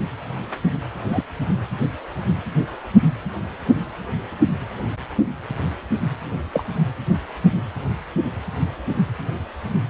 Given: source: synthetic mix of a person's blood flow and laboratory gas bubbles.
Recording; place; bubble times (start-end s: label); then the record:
Doppler ultrasound of blood flow; precordium
1.08-1.23 s: bubbles
6.53-6.65 s: bubbles
From the record:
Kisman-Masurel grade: 122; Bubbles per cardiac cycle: 1 to 2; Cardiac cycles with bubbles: 10 to 50%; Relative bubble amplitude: moderate (0.250 to 0.450); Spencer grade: 2 (many but less than half of the cardiac periods contain bubble signals, singularly or in groups); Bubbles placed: anywhere in the cardiac cycle